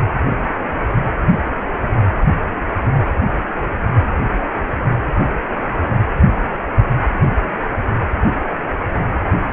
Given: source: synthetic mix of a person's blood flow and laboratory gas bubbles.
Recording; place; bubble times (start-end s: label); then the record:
Doppler ultrasound of blood flow; precordium
no bubbles
From the record:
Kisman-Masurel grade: 000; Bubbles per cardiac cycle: 0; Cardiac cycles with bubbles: 0%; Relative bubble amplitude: no bubbles discernible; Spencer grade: 0 (complete lack of bubble signals)